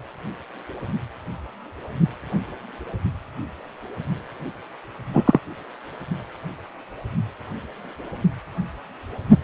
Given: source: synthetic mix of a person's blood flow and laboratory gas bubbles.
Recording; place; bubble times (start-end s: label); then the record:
Doppler ultrasound of blood flow; precordium
5.13-5.39 s: bubbles
From the record:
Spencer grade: 1 (occasional bubble signal discernible with the cardiac motion signal, with majority of cardiac periods free of bubbles); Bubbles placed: anywhere in the cardiac cycle